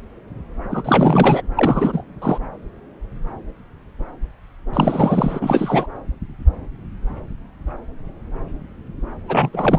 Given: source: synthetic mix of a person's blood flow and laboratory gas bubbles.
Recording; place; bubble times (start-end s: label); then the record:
Doppler ultrasound of blood flow; subclavian vein
0.71-1.42 s: bubbles
1.56-2.04 s: bubbles
2.21-2.38 s: bubbles
4.73-5.88 s: bubbles
9.28-9.50 s: bubbles
9.53-9.79 s: bubbles
From the record:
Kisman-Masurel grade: 333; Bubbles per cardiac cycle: rolling drumbeat, 9 or more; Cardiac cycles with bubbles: 50 to 99%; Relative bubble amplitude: loud (0.450 to 0.775); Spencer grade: 3 (all of the cardiac periods contain showers or single bubble signals, but not dominating or overriding the cardiac motion signals); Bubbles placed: anywhere in the cardiac cycle